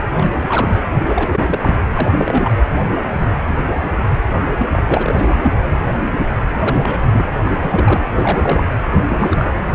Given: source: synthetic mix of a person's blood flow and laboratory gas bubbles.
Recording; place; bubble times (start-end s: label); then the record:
Doppler ultrasound of blood flow; precordium
0.00-0.03 s: bubbles
0.17-0.82 s: bubbles
1.06-1.74 s: bubbles
1.94-2.52 s: bubbles
4.58-4.66 s: bubbles
4.73-4.83 s: bubbles
4.88-5.54 s: bubbles
6.63-6.99 s: bubbles
7.12-7.29 s: bubbles
7.44-7.59 s: bubbles
7.62-8.04 s: bubbles
8.15-8.67 s: bubbles
8.90-9.53 s: bubbles
From the record:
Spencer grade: 3 (all of the cardiac periods contain showers or single bubble signals, but not dominating or overriding the cardiac motion signals); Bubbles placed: anywhere in the cardiac cycle